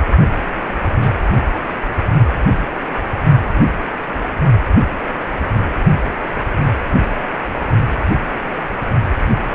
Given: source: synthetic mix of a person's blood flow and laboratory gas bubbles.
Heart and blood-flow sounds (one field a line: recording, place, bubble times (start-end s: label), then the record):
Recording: Doppler ultrasound of blood flow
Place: precordium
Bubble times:
0.67-0.74 s: bubbles
0.99-1.13 s: bubbles
From the record:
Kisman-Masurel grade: 111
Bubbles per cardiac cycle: 1 to 2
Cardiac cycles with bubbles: 1 to 10%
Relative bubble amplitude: barely perceptible (0.100 to 0.250)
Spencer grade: 1 (occasional bubble signal discernible with the cardiac motion signal, with majority of cardiac periods free of bubbles)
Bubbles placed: only in the low amplitude regions of the cardiac cycle